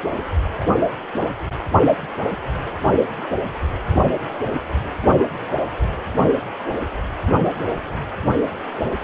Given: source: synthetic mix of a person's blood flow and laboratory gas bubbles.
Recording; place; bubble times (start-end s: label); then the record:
Doppler ultrasound of blood flow; precordium
0.56-0.68 s: bubbles
From the record:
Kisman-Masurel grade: 111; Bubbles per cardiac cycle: 1 to 2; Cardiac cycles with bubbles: 1 to 10%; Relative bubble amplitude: barely perceptible (0.100 to 0.250); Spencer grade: 1 (occasional bubble signal discernible with the cardiac motion signal, with majority of cardiac periods free of bubbles); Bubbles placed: anywhere in the cardiac cycle